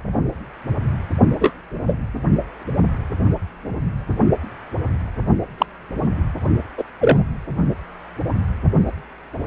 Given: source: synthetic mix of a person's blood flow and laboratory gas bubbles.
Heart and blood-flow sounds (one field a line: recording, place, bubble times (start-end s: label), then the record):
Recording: Doppler ultrasound of blood flow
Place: precordium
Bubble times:
1.40-1.53 s: bubbles
1.87-1.97 s: bubbles
5.58-5.66 s: bubbles
6.78-6.83 s: bubbles
7.00-7.19 s: bubbles
From the record:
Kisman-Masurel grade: 123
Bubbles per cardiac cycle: 1 to 2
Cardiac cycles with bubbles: 10 to 50%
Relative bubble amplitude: loud (0.450 to 0.775)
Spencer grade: 2 (many but less than half of the cardiac periods contain bubble signals, singularly or in groups)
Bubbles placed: only in the low amplitude regions of the cardiac cycle